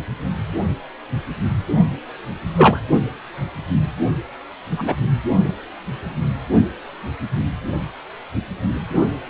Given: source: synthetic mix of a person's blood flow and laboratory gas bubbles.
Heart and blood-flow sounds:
Doppler ultrasound of blood flow; precordium
2.58-2.79 s: bubbles
4.78-4.95 s: bubbles
5.45-5.49 s: bubbles
From the record:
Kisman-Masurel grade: 123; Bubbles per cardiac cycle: 1 to 2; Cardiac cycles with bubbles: 10 to 50%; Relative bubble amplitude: loud (0.450 to 0.775); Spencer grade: 2 (many but less than half of the cardiac periods contain bubble signals, singularly or in groups); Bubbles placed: only in the low amplitude regions of the cardiac cycle

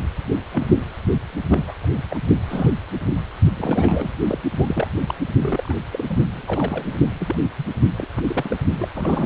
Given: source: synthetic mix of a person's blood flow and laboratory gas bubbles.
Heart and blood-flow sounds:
Doppler ultrasound of blood flow; precordium
0.00-0.07 s: bubbles
0.52-0.69 s: bubbles
1.50-1.64 s: bubbles
1.68-1.74 s: bubbles
1.82-2.03 s: bubbles
2.10-2.20 s: bubbles
2.47-2.76 s: bubbles
3.56-4.09 s: bubbles
4.29-4.38 s: bubbles
4.56-4.88 s: bubbles
5.07-5.14 s: bubbles
5.39-5.73 s: bubbles
5.92-6.17 s: bubbles
6.26-6.96 s: bubbles
7.20-7.35 s: bubbles
7.58-7.64 s: bubbles
7.96-8.06 s: bubbles
8.16-8.57 s: bubbles
8.78-8.89 s: bubbles
8.95-9.26 s: bubbles
From the record:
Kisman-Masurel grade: 232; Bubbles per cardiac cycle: several, 3 to 8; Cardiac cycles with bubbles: 50 to 99%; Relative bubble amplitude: moderate (0.250 to 0.450); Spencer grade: 3 (all of the cardiac periods contain showers or single bubble signals, but not dominating or overriding the cardiac motion signals); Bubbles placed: only in the low amplitude regions of the cardiac cycle

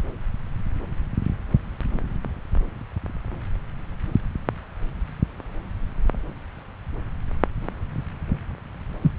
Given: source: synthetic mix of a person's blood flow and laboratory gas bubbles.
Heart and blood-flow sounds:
Doppler ultrasound of blood flow; subclavian vein
9.01-9.12 s: bubbles
From the record:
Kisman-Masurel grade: 213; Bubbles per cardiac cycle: several, 3 to 8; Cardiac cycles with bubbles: 1 to 10%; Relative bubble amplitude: loud (0.450 to 0.775); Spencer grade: 1 (occasional bubble signal discernible with the cardiac motion signal, with majority of cardiac periods free of bubbles); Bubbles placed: anywhere in the cardiac cycle

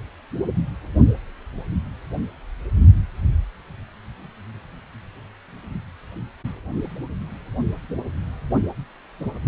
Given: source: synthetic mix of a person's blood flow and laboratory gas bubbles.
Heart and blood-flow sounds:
Doppler ultrasound of blood flow; precordium
no bubbles
From the record:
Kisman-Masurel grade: 000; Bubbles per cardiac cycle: 0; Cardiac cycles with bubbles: 0%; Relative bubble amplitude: no bubbles discernible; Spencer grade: 0 (complete lack of bubble signals)

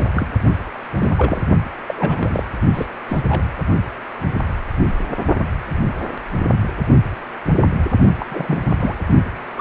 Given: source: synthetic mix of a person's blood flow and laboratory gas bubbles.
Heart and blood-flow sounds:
Doppler ultrasound of blood flow; precordium
0.00-0.07 s: bubbles
0.14-0.27 s: bubbles
0.98-1.10 s: bubbles
1.17-1.42 s: bubbles
1.88-1.94 s: bubbles
1.98-2.44 s: bubbles
2.73-2.86 s: bubbles
3.08-3.23 s: bubbles
3.29-3.49 s: bubbles
8.19-8.26 s: bubbles
8.29-8.66 s: bubbles
8.79-8.99 s: bubbles
9.57-9.61 s: bubbles
From the record:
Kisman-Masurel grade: 232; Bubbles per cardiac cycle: several, 3 to 8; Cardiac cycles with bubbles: 50 to 99%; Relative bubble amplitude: moderate (0.250 to 0.450); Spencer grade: 3 (all of the cardiac periods contain showers or single bubble signals, but not dominating or overriding the cardiac motion signals); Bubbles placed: only in the low amplitude regions of the cardiac cycle

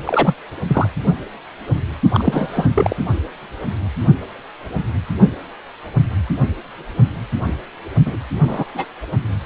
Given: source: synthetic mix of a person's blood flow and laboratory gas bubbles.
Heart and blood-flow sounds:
Doppler ultrasound of blood flow; precordium
0.05-0.34 s: bubbles
0.67-0.88 s: bubbles
2.14-2.67 s: bubbles
2.74-2.96 s: bubbles
8.05-8.16 s: bubbles
8.47-8.64 s: bubbles
8.74-8.85 s: bubbles
From the record:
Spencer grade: 2 (many but less than half of the cardiac periods contain bubble signals, singularly or in groups); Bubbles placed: only in the low amplitude regions of the cardiac cycle

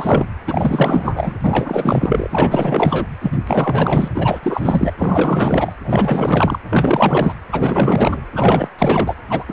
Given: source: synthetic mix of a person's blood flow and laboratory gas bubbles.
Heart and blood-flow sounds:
Doppler ultrasound of blood flow; precordium
0.00-0.26 s: bubbles
0.46-1.35 s: bubbles
1.42-3.08 s: bubbles
3.21-3.38 s: bubbles
3.47-4.11 s: bubbles
4.14-4.40 s: bubbles
4.43-4.93 s: bubbles
4.98-5.73 s: bubbles
5.83-6.59 s: bubbles
6.70-7.35 s: bubbles
7.51-8.17 s: bubbles
8.31-8.69 s: bubbles
8.78-9.17 s: bubbles
9.29-9.45 s: bubbles
9.48-9.53 s: bubbles
From the record:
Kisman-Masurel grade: 444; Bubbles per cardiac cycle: continuous sound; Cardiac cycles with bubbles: 100%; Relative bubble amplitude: maximal (0.775 to 0.999); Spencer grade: 4 (maximum detectable bubble signal sounding continuously throughout systole and diastole of every cardiac period, and overriding the amplitude of the normal cardiac signals); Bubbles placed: anywhere in the cardiac cycle

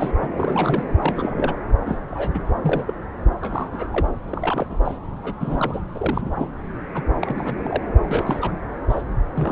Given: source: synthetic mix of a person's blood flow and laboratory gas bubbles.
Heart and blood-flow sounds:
Doppler ultrasound of blood flow; subclavian vein
0.00-0.11 s: bubbles
0.21-0.28 s: bubbles
0.37-0.84 s: bubbles
1.00-1.58 s: bubbles
1.86-1.97 s: bubbles
2.12-2.40 s: bubbles
2.62-2.84 s: bubbles
2.87-2.94 s: bubbles
3.41-4.06 s: bubbles
4.29-4.67 s: bubbles
4.70-4.78 s: bubbles
4.84-4.99 s: bubbles
5.22-5.36 s: bubbles
5.40-5.82 s: bubbles
5.95-6.33 s: bubbles
6.36-6.51 s: bubbles
6.94-7.03 s: bubbles
7.21-7.84 s: bubbles
8.11-8.52 s: bubbles
8.89-9.02 s: bubbles
9.33-9.52 s: bubbles
From the record:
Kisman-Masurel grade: 242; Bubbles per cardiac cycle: several, 3 to 8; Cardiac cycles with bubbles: 100%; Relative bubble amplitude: moderate (0.250 to 0.450); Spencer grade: 3 (all of the cardiac periods contain showers or single bubble signals, but not dominating or overriding the cardiac motion signals); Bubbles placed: anywhere in the cardiac cycle

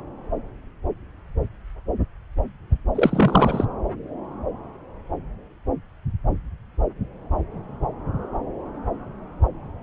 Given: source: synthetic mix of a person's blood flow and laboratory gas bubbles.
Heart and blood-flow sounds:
Doppler ultrasound of blood flow; subclavian vein
2.95-3.65 s: bubbles
From the record:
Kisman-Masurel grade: 212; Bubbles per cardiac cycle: several, 3 to 8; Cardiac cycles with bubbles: 1 to 10%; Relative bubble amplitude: moderate (0.250 to 0.450); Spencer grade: 1 (occasional bubble signal discernible with the cardiac motion signal, with majority of cardiac periods free of bubbles); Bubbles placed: anywhere in the cardiac cycle

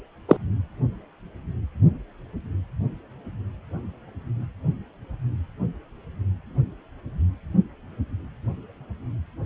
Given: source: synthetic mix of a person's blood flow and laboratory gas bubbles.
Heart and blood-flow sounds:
Doppler ultrasound of blood flow; precordium
0.28-0.37 s: bubbles
From the record:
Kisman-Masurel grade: 113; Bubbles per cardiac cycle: 1 to 2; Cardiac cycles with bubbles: 1 to 10%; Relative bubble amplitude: loud (0.450 to 0.775); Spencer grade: 1 (occasional bubble signal discernible with the cardiac motion signal, with majority of cardiac periods free of bubbles); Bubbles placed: only in the low amplitude regions of the cardiac cycle

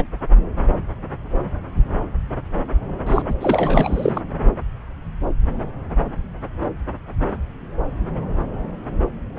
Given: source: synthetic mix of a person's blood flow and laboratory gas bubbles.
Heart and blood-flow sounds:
Doppler ultrasound of blood flow; subclavian vein
0.00-0.04 s: bubbles
3.06-3.22 s: bubbles
3.28-3.35 s: bubbles
3.40-4.21 s: bubbles
From the record:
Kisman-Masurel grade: 223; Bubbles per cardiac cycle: several, 3 to 8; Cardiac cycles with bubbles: 10 to 50%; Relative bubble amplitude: loud (0.450 to 0.775); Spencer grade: 2 (many but less than half of the cardiac periods contain bubble signals, singularly or in groups); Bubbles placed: anywhere in the cardiac cycle

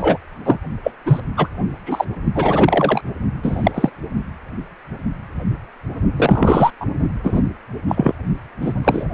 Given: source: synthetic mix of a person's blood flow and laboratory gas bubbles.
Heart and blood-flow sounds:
Doppler ultrasound of blood flow; precordium
0.00-0.17 s: bubbles
0.45-0.57 s: bubbles
0.83-0.91 s: bubbles
1.06-1.20 s: bubbles
1.36-1.49 s: bubbles
1.85-2.05 s: bubbles
2.35-3.02 s: bubbles
3.43-3.72 s: bubbles
3.74-3.90 s: bubbles
6.17-6.71 s: bubbles
6.80-6.85 s: bubbles
7.23-7.42 s: bubbles
7.88-8.12 s: bubbles
8.61-8.74 s: bubbles
8.84-9.05 s: bubbles
From the record:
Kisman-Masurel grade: 233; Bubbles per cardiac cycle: several, 3 to 8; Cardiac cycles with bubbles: 50 to 99%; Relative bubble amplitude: loud (0.450 to 0.775); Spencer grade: 3 (all of the cardiac periods contain showers or single bubble signals, but not dominating or overriding the cardiac motion signals); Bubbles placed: only in the low amplitude regions of the cardiac cycle

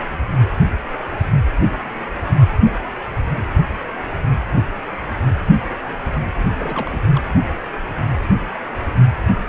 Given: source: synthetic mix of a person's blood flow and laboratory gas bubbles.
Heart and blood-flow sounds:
Doppler ultrasound of blood flow; precordium
6.38-6.48 s: bubbles
6.56-7.00 s: bubbles
7.14-7.21 s: bubbles
From the record:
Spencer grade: 1 (occasional bubble signal discernible with the cardiac motion signal, with majority of cardiac periods free of bubbles); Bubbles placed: anywhere in the cardiac cycle

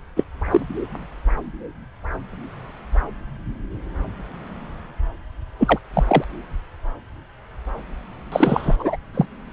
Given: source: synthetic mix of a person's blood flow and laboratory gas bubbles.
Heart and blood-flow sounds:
Doppler ultrasound of blood flow; subclavian vein
0.16-0.24 s: bubbles
0.51-0.60 s: bubbles
5.58-5.79 s: bubbles
5.93-6.03 s: bubbles
6.07-6.24 s: bubbles
8.31-8.77 s: bubbles
8.79-8.96 s: bubbles
9.14-9.25 s: bubbles
From the record:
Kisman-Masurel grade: 223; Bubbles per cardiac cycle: several, 3 to 8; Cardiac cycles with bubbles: 10 to 50%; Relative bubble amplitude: loud (0.450 to 0.775); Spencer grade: 2 (many but less than half of the cardiac periods contain bubble signals, singularly or in groups); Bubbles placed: anywhere in the cardiac cycle

